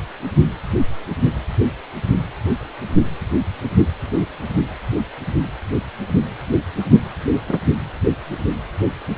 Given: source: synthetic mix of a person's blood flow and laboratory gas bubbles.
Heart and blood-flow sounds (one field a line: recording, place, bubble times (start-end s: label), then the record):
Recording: Doppler ultrasound of blood flow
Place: precordium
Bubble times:
7.48-7.58 s: bubbles
From the record:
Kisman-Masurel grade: 123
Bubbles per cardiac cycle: 1 to 2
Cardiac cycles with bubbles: 10 to 50%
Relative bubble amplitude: loud (0.450 to 0.775)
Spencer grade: 2 (many but less than half of the cardiac periods contain bubble signals, singularly or in groups)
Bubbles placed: anywhere in the cardiac cycle